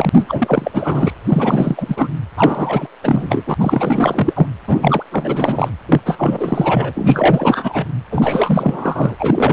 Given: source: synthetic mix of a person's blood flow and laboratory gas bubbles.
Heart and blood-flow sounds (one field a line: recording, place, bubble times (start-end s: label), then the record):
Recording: Doppler ultrasound of blood flow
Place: precordium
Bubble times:
0.00-1.13 s: bubbles
1.24-2.08 s: bubbles
2.37-2.87 s: bubbles
3.03-3.45 s: bubbles
3.47-3.55 s: bubbles
3.60-4.48 s: bubbles
4.67-5.04 s: bubbles
5.11-5.70 s: bubbles
5.87-6.01 s: bubbles
6.06-7.86 s: bubbles
8.10-9.15 s: bubbles
9.19-9.53 s: bubbles
From the record:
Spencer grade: 4 (maximum detectable bubble signal sounding continuously throughout systole and diastole of every cardiac period, and overriding the amplitude of the normal cardiac signals)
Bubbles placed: anywhere in the cardiac cycle